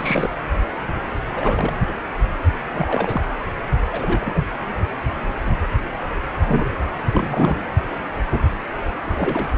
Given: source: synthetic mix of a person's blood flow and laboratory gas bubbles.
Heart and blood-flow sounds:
Doppler ultrasound of blood flow; precordium
0.00-0.29 s: bubbles
1.28-1.73 s: bubbles
2.73-3.21 s: bubbles
3.92-4.40 s: bubbles
7.14-7.64 s: bubbles
9.05-9.53 s: bubbles
From the record:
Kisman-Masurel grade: 222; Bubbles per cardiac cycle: several, 3 to 8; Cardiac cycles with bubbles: 10 to 50%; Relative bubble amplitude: moderate (0.250 to 0.450); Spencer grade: 2 (many but less than half of the cardiac periods contain bubble signals, singularly or in groups); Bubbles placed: anywhere in the cardiac cycle

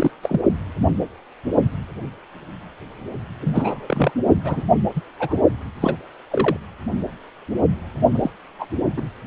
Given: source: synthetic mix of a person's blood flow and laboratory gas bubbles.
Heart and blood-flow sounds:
Doppler ultrasound of blood flow; precordium
0.00-0.11 s: bubbles
0.22-0.41 s: bubbles
3.41-4.11 s: bubbles
4.44-4.63 s: bubbles
4.95-5.01 s: bubbles
5.19-5.41 s: bubbles
5.80-5.96 s: bubbles
6.30-6.57 s: bubbles
8.15-8.30 s: bubbles
8.59-8.66 s: bubbles
8.96-9.05 s: bubbles
From the record:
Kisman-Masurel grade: 232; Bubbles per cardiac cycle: several, 3 to 8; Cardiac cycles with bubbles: 50 to 99%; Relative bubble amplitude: moderate (0.250 to 0.450); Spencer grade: 3 (all of the cardiac periods contain showers or single bubble signals, but not dominating or overriding the cardiac motion signals); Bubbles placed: only in the low amplitude regions of the cardiac cycle

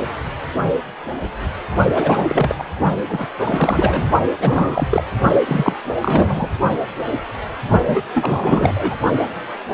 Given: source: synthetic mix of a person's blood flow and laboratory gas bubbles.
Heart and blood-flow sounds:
Doppler ultrasound of blood flow; precordium
1.95-2.55 s: bubbles
2.58-2.64 s: bubbles
3.08-3.27 s: bubbles
3.39-4.10 s: bubbles
4.38-5.03 s: bubbles
5.45-5.74 s: bubbles
6.01-6.49 s: bubbles
7.86-8.03 s: bubbles
8.14-8.96 s: bubbles
From the record:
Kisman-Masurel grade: 333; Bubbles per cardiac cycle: rolling drumbeat, 9 or more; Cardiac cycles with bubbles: 50 to 99%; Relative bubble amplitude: loud (0.450 to 0.775); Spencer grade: 3 (all of the cardiac periods contain showers or single bubble signals, but not dominating or overriding the cardiac motion signals); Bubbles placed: only in the low amplitude regions of the cardiac cycle

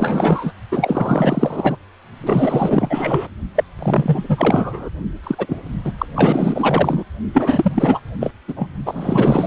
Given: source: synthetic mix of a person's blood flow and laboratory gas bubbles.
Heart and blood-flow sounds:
Doppler ultrasound of blood flow; precordium
0.00-0.52 s: bubbles
0.72-1.77 s: bubbles
2.19-3.31 s: bubbles
3.55-3.64 s: bubbles
3.79-4.89 s: bubbles
5.23-5.35 s: bubbles
5.38-5.61 s: bubbles
5.84-5.92 s: bubbles
5.98-6.05 s: bubbles
6.16-7.04 s: bubbles
7.33-7.71 s: bubbles
7.74-7.99 s: bubbles
8.20-8.32 s: bubbles
8.47-8.69 s: bubbles
8.86-9.47 s: bubbles
From the record:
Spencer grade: 4 (maximum detectable bubble signal sounding continuously throughout systole and diastole of every cardiac period, and overriding the amplitude of the normal cardiac signals); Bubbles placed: only in the low amplitude regions of the cardiac cycle

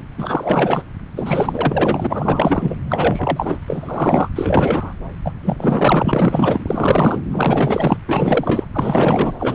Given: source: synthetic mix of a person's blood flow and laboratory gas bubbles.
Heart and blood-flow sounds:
Doppler ultrasound of blood flow; subclavian vein
0.17-0.83 s: bubbles
1.16-2.75 s: bubbles
2.89-3.57 s: bubbles
3.68-4.29 s: bubbles
4.36-4.94 s: bubbles
5.24-5.32 s: bubbles
5.43-6.64 s: bubbles
6.67-7.22 s: bubbles
7.32-7.97 s: bubbles
8.07-8.66 s: bubbles
8.72-9.34 s: bubbles
9.38-9.55 s: bubbles
From the record:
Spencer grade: 4 (maximum detectable bubble signal sounding continuously throughout systole and diastole of every cardiac period, and overriding the amplitude of the normal cardiac signals); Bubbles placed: anywhere in the cardiac cycle

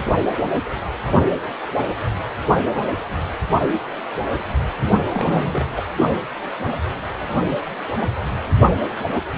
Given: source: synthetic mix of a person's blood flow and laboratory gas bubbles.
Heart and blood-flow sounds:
Doppler ultrasound of blood flow; precordium
5.12-5.67 s: bubbles
5.76-5.82 s: bubbles
From the record:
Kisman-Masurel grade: 212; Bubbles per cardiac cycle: several, 3 to 8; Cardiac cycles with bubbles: 1 to 10%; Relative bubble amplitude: moderate (0.250 to 0.450); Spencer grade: 1 (occasional bubble signal discernible with the cardiac motion signal, with majority of cardiac periods free of bubbles); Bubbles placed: only in the low amplitude regions of the cardiac cycle

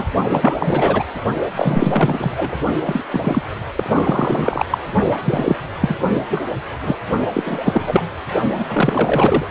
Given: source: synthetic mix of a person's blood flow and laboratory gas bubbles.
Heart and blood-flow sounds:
Doppler ultrasound of blood flow; precordium
0.00-0.07 s: bubbles
0.29-1.04 s: bubbles
1.54-2.57 s: bubbles
2.85-3.04 s: bubbles
3.10-3.42 s: bubbles
3.75-4.66 s: bubbles
4.70-4.78 s: bubbles
5.25-5.57 s: bubbles
5.81-5.96 s: bubbles
6.14-6.21 s: bubbles
6.29-6.46 s: bubbles
6.81-6.97 s: bubbles
7.34-8.03 s: bubbles
8.57-8.65 s: bubbles
8.68-9.46 s: bubbles
From the record:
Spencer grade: 3 (all of the cardiac periods contain showers or single bubble signals, but not dominating or overriding the cardiac motion signals); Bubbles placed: only in the low amplitude regions of the cardiac cycle

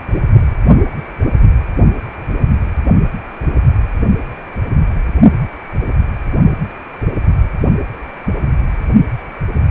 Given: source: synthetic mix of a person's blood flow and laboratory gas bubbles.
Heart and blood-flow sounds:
Doppler ultrasound of blood flow; precordium
no bubbles
From the record:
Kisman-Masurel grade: 000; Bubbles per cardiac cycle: 0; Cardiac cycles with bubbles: 0%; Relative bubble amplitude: no bubbles discernible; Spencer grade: 0 (complete lack of bubble signals)

